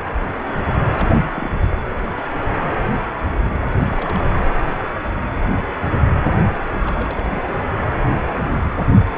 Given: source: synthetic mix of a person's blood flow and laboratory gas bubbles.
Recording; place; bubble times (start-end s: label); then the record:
Doppler ultrasound of blood flow; precordium
0.05-0.10 s: bubbles
0.88-1.08 s: bubbles
1.17-1.50 s: bubbles
1.72-1.74 s: bubbles
1.90-1.93 s: bubbles
2.06-2.12 s: bubbles
3.62-3.66 s: bubbles
3.79-4.26 s: bubbles
6.72-7.29 s: bubbles
7.33-7.63 s: bubbles
From the record:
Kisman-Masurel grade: 221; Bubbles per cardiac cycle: several, 3 to 8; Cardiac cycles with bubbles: 10 to 50%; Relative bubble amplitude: barely perceptible (0.100 to 0.250); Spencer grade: 2 (many but less than half of the cardiac periods contain bubble signals, singularly or in groups); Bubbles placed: anywhere in the cardiac cycle